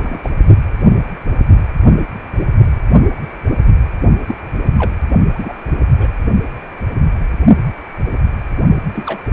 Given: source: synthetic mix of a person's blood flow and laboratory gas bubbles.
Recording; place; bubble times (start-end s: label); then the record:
Doppler ultrasound of blood flow; precordium
0.00-0.18 s: bubbles
0.24-0.30 s: bubbles
4.26-4.35 s: bubbles
4.65-4.71 s: bubbles
4.79-4.91 s: bubbles
5.33-5.54 s: bubbles
5.98-6.07 s: bubbles
8.95-9.19 s: bubbles
From the record:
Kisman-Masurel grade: 222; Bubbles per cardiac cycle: several, 3 to 8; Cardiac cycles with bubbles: 10 to 50%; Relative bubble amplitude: moderate (0.250 to 0.450); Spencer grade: 2 (many but less than half of the cardiac periods contain bubble signals, singularly or in groups); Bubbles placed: only in the low amplitude regions of the cardiac cycle